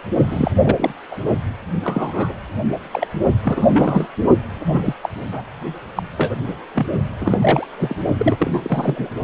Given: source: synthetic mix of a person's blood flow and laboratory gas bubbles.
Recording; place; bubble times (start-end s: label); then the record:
Doppler ultrasound of blood flow; precordium
0.30-0.51 s: bubbles
0.62-0.93 s: bubbles
1.10-1.16 s: bubbles
1.83-2.33 s: bubbles
2.92-3.07 s: bubbles
3.42-4.07 s: bubbles
4.61-4.94 s: bubbles
5.03-5.10 s: bubbles
5.32-5.42 s: bubbles
5.96-6.03 s: bubbles
6.17-6.36 s: bubbles
6.48-6.54 s: bubbles
6.75-6.87 s: bubbles
7.21-7.38 s: bubbles
7.41-7.67 s: bubbles
7.77-7.96 s: bubbles
8.18-8.37 s: bubbles
8.39-9.09 s: bubbles
From the record:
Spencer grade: 3 (all of the cardiac periods contain showers or single bubble signals, but not dominating or overriding the cardiac motion signals); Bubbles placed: only in the low amplitude regions of the cardiac cycle